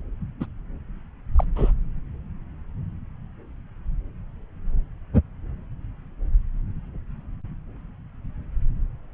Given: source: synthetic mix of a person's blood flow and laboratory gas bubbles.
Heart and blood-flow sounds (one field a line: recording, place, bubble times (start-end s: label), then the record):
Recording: Doppler ultrasound of blood flow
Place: subclavian vein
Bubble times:
0.40-0.46 s: bubbles
1.35-1.44 s: bubbles
1.56-1.72 s: bubbles
From the record:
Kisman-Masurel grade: 122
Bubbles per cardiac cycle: 1 to 2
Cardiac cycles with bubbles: 10 to 50%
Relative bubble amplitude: moderate (0.250 to 0.450)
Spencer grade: 2 (many but less than half of the cardiac periods contain bubble signals, singularly or in groups)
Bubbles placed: anywhere in the cardiac cycle